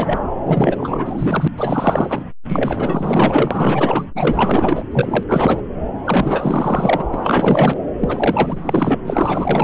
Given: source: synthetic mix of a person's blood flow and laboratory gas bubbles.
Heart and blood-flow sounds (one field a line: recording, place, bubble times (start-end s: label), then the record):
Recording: Doppler ultrasound of blood flow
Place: subclavian vein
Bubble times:
0.00-0.20 s: bubbles
0.45-1.48 s: bubbles
1.56-2.23 s: bubbles
2.49-4.06 s: bubbles
4.15-4.85 s: bubbles
4.92-5.23 s: bubbles
5.28-5.61 s: bubbles
6.04-7.04 s: bubbles
7.12-7.79 s: bubbles
8.00-9.00 s: bubbles
9.04-9.64 s: bubbles
From the record:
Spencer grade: 4 (maximum detectable bubble signal sounding continuously throughout systole and diastole of every cardiac period, and overriding the amplitude of the normal cardiac signals)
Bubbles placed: anywhere in the cardiac cycle